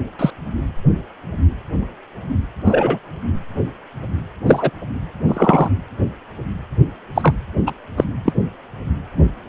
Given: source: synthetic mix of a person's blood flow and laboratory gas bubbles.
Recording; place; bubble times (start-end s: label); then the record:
Doppler ultrasound of blood flow; precordium
0.19-0.30 s: bubbles
2.65-2.99 s: bubbles
4.46-4.70 s: bubbles
5.28-5.68 s: bubbles
7.14-7.34 s: bubbles
7.67-7.71 s: bubbles
7.97-8.04 s: bubbles
8.25-8.32 s: bubbles
From the record:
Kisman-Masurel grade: 123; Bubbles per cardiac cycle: 1 to 2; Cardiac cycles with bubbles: 10 to 50%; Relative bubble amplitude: loud (0.450 to 0.775); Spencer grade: 2 (many but less than half of the cardiac periods contain bubble signals, singularly or in groups); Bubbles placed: anywhere in the cardiac cycle